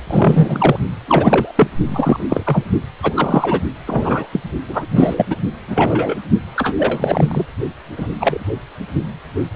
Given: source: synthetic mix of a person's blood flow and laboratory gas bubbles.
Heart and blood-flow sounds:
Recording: Doppler ultrasound of blood flow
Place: precordium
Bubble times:
0.07-0.78 s: bubbles
1.08-1.52 s: bubbles
1.56-1.67 s: bubbles
1.88-2.26 s: bubbles
2.29-2.63 s: bubbles
3.02-3.60 s: bubbles
3.85-4.27 s: bubbles
4.33-4.41 s: bubbles
4.68-5.27 s: bubbles
5.29-5.37 s: bubbles
5.67-6.16 s: bubbles
6.55-6.72 s: bubbles
6.77-7.46 s: bubbles
7.97-8.08 s: bubbles
8.20-8.44 s: bubbles
From the record:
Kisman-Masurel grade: 233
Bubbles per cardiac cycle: several, 3 to 8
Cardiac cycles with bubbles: 50 to 99%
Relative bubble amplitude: loud (0.450 to 0.775)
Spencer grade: 3 (all of the cardiac periods contain showers or single bubble signals, but not dominating or overriding the cardiac motion signals)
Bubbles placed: only in the low amplitude regions of the cardiac cycle

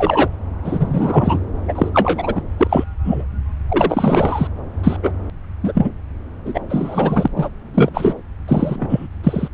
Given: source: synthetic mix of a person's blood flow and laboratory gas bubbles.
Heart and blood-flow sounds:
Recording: Doppler ultrasound of blood flow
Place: subclavian vein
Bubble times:
0.00-0.29 s: bubbles
0.64-1.38 s: bubbles
1.68-1.90 s: bubbles
1.94-2.42 s: bubbles
2.58-2.84 s: bubbles
3.04-3.25 s: bubbles
3.69-4.48 s: bubbles
4.83-4.97 s: bubbles
5.03-5.12 s: bubbles
5.63-5.91 s: bubbles
6.45-6.60 s: bubbles
6.70-7.28 s: bubbles
7.36-7.49 s: bubbles
7.74-7.90 s: bubbles
7.94-8.14 s: bubbles
8.47-9.07 s: bubbles
9.23-9.48 s: bubbles
From the record:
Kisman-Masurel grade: 233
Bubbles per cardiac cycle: several, 3 to 8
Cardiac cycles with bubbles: 50 to 99%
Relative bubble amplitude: loud (0.450 to 0.775)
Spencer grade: 3 (all of the cardiac periods contain showers or single bubble signals, but not dominating or overriding the cardiac motion signals)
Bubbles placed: anywhere in the cardiac cycle

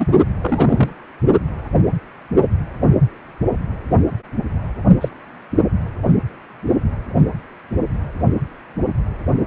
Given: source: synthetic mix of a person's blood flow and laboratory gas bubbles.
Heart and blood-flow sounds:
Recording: Doppler ultrasound of blood flow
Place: precordium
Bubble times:
0.00-0.07 s: bubbles
0.41-0.93 s: bubbles
5.00-5.08 s: bubbles
From the record:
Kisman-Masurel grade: 123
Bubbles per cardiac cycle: 1 to 2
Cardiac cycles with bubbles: 10 to 50%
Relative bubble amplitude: loud (0.450 to 0.775)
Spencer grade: 2 (many but less than half of the cardiac periods contain bubble signals, singularly or in groups)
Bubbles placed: only in the low amplitude regions of the cardiac cycle

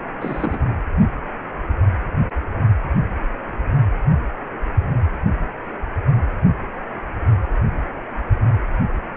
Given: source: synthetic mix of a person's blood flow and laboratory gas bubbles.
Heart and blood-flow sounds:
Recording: Doppler ultrasound of blood flow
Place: precordium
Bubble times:
0.20-0.78 s: bubbles
From the record:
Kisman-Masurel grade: 211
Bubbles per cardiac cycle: several, 3 to 8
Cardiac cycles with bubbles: 1 to 10%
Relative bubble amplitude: barely perceptible (0.100 to 0.250)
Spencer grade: 1 (occasional bubble signal discernible with the cardiac motion signal, with majority of cardiac periods free of bubbles)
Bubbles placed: only in the low amplitude regions of the cardiac cycle

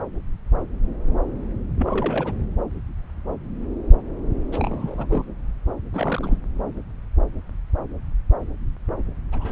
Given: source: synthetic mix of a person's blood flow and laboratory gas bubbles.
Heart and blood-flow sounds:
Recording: Doppler ultrasound of blood flow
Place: subclavian vein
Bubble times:
1.79-2.32 s: bubbles
4.52-5.07 s: bubbles
5.09-5.24 s: bubbles
5.94-6.37 s: bubbles
9.32-9.52 s: bubbles
From the record:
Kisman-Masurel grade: 221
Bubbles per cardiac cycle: several, 3 to 8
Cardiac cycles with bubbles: 10 to 50%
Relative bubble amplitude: barely perceptible (0.100 to 0.250)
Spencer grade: 2 (many but less than half of the cardiac periods contain bubble signals, singularly or in groups)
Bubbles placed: anywhere in the cardiac cycle

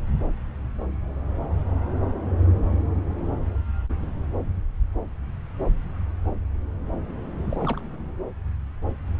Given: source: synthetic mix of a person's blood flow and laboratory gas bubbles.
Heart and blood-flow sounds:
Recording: Doppler ultrasound of blood flow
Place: subclavian vein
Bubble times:
7.49-7.81 s: bubbles
From the record:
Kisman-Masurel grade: 211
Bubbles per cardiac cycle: several, 3 to 8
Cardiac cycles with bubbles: 1 to 10%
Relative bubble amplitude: barely perceptible (0.100 to 0.250)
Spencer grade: 1 (occasional bubble signal discernible with the cardiac motion signal, with majority of cardiac periods free of bubbles)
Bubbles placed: anywhere in the cardiac cycle

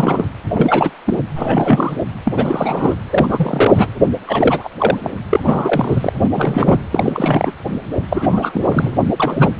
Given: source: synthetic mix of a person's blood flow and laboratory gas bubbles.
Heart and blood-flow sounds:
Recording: Doppler ultrasound of blood flow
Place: precordium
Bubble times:
0.00-0.24 s: bubbles
0.51-0.90 s: bubbles
1.05-1.18 s: bubbles
1.35-1.97 s: bubbles
2.26-2.33 s: bubbles
2.36-2.95 s: bubbles
3.10-3.87 s: bubbles
4.26-4.69 s: bubbles
4.78-4.98 s: bubbles
5.03-5.10 s: bubbles
5.29-5.40 s: bubbles
5.45-6.11 s: bubbles
6.18-6.29 s: bubbles
6.33-6.80 s: bubbles
6.91-7.52 s: bubbles
8.09-8.97 s: bubbles
9.20-9.49 s: bubbles
From the record:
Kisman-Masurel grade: 333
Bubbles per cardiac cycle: rolling drumbeat, 9 or more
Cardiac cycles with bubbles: 50 to 99%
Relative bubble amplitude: loud (0.450 to 0.775)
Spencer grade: 3 (all of the cardiac periods contain showers or single bubble signals, but not dominating or overriding the cardiac motion signals)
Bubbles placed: anywhere in the cardiac cycle

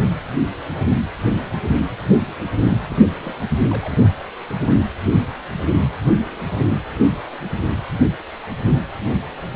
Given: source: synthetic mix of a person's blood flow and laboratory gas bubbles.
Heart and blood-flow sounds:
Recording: Doppler ultrasound of blood flow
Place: precordium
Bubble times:
2.72-3.48 s: bubbles
3.69-3.94 s: bubbles
From the record:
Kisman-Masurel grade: 211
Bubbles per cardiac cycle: several, 3 to 8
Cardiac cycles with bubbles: 1 to 10%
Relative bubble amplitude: barely perceptible (0.100 to 0.250)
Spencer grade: 1 (occasional bubble signal discernible with the cardiac motion signal, with majority of cardiac periods free of bubbles)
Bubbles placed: anywhere in the cardiac cycle

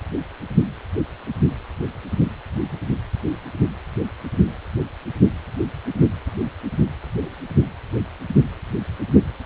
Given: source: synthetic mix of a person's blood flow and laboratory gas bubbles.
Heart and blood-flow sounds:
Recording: Doppler ultrasound of blood flow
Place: precordium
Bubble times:
no bubbles
From the record:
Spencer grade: 0 (complete lack of bubble signals)

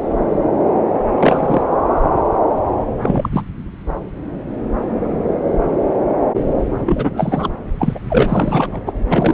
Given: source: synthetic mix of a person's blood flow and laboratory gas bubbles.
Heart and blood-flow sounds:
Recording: Doppler ultrasound of blood flow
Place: subclavian vein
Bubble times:
1.16-1.63 s: bubbles
3.02-3.29 s: bubbles
3.32-3.42 s: bubbles
6.85-7.50 s: bubbles
7.79-7.99 s: bubbles
8.10-8.80 s: bubbles
8.87-8.92 s: bubbles
9.09-9.34 s: bubbles
From the record:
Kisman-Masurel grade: 223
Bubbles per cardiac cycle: several, 3 to 8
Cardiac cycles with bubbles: 10 to 50%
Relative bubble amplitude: loud (0.450 to 0.775)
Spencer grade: 2 (many but less than half of the cardiac periods contain bubble signals, singularly or in groups)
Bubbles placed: anywhere in the cardiac cycle

